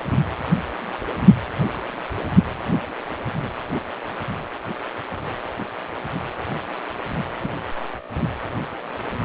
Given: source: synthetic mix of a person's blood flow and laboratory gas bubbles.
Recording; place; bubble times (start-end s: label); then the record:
Doppler ultrasound of blood flow; precordium
7.42-7.53 s: bubbles
From the record:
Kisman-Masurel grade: 111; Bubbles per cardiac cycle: 1 to 2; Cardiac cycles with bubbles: 1 to 10%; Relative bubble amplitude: barely perceptible (0.100 to 0.250); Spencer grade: 1 (occasional bubble signal discernible with the cardiac motion signal, with majority of cardiac periods free of bubbles); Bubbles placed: anywhere in the cardiac cycle